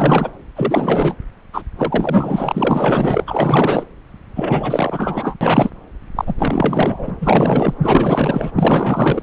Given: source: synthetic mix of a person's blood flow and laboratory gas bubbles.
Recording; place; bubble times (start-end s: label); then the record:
Doppler ultrasound of blood flow; subclavian vein
0.00-0.30 s: bubbles
0.56-1.15 s: bubbles
1.52-1.62 s: bubbles
1.77-3.83 s: bubbles
4.36-5.35 s: bubbles
5.41-5.71 s: bubbles
6.16-7.11 s: bubbles
7.21-7.74 s: bubbles
7.82-8.52 s: bubbles
8.55-9.22 s: bubbles
From the record:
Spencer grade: 4 (maximum detectable bubble signal sounding continuously throughout systole and diastole of every cardiac period, and overriding the amplitude of the normal cardiac signals); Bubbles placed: anywhere in the cardiac cycle